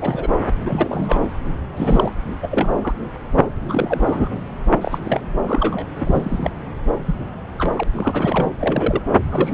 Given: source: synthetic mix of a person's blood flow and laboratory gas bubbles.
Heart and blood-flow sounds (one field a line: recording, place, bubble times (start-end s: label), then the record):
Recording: Doppler ultrasound of blood flow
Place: subclavian vein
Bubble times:
0.00-0.27 s: bubbles
0.65-1.19 s: bubbles
1.76-2.13 s: bubbles
2.42-2.48 s: bubbles
2.50-2.95 s: bubbles
3.68-4.33 s: bubbles
4.81-4.99 s: bubbles
5.04-5.21 s: bubbles
5.46-5.86 s: bubbles
5.96-6.50 s: bubbles
7.05-7.15 s: bubbles
7.57-7.83 s: bubbles
7.93-8.46 s: bubbles
8.60-9.02 s: bubbles
9.31-9.54 s: bubbles
From the record:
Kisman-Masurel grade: 242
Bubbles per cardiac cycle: several, 3 to 8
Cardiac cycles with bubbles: 100%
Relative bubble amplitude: moderate (0.250 to 0.450)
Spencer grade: 3 (all of the cardiac periods contain showers or single bubble signals, but not dominating or overriding the cardiac motion signals)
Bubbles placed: anywhere in the cardiac cycle